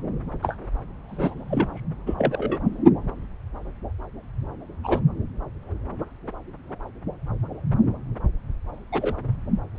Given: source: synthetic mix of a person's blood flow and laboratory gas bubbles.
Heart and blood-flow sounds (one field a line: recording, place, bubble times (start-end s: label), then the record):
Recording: Doppler ultrasound of blood flow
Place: subclavian vein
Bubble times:
0.42-0.57 s: bubbles
1.09-1.34 s: bubbles
1.48-1.80 s: bubbles
2.06-2.58 s: bubbles
4.83-4.99 s: bubbles
8.91-9.14 s: bubbles
From the record:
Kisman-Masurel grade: 122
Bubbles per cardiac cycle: 1 to 2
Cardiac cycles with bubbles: 10 to 50%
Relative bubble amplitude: moderate (0.250 to 0.450)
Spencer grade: 2 (many but less than half of the cardiac periods contain bubble signals, singularly or in groups)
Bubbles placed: anywhere in the cardiac cycle